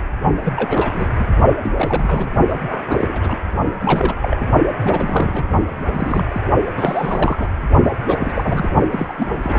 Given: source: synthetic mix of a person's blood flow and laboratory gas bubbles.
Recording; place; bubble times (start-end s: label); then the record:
Doppler ultrasound of blood flow; precordium
0.43-0.53 s: bubbles
0.55-1.26 s: bubbles
1.63-1.72 s: bubbles
1.76-2.31 s: bubbles
2.50-2.55 s: bubbles
2.69-3.38 s: bubbles
3.79-4.15 s: bubbles
4.21-4.37 s: bubbles
4.41-4.46 s: bubbles
4.83-5.46 s: bubbles
5.68-6.24 s: bubbles
6.32-6.41 s: bubbles
6.67-6.71 s: bubbles
6.76-7.49 s: bubbles
7.83-7.91 s: bubbles
8.06-8.71 s: bubbles
8.90-9.13 s: bubbles
9.18-9.59 s: bubbles
From the record:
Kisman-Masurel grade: 332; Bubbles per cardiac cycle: rolling drumbeat, 9 or more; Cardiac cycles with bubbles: 50 to 99%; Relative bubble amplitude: moderate (0.250 to 0.450); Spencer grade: 3 (all of the cardiac periods contain showers or single bubble signals, but not dominating or overriding the cardiac motion signals); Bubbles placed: only in the low amplitude regions of the cardiac cycle